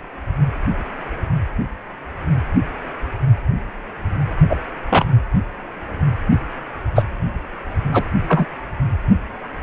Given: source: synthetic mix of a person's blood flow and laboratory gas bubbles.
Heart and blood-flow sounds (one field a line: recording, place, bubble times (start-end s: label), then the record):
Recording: Doppler ultrasound of blood flow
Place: precordium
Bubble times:
4.50-4.57 s: bubbles
4.91-5.05 s: bubbles
6.95-7.05 s: bubbles
7.93-8.04 s: bubbles
8.29-8.46 s: bubbles
From the record:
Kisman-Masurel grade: 123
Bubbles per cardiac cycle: 1 to 2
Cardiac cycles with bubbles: 10 to 50%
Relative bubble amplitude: loud (0.450 to 0.775)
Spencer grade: 2 (many but less than half of the cardiac periods contain bubble signals, singularly or in groups)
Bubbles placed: only in the low amplitude regions of the cardiac cycle